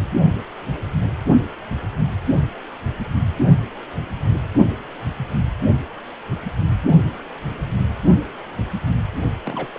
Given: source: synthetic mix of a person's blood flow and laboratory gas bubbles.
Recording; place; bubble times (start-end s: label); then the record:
Doppler ultrasound of blood flow; precordium
9.45-9.69 s: bubbles
9.73-9.79 s: bubbles
From the record:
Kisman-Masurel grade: 211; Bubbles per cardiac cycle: several, 3 to 8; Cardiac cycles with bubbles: 1 to 10%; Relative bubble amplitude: barely perceptible (0.100 to 0.250); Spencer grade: 1 (occasional bubble signal discernible with the cardiac motion signal, with majority of cardiac periods free of bubbles); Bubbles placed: only in the low amplitude regions of the cardiac cycle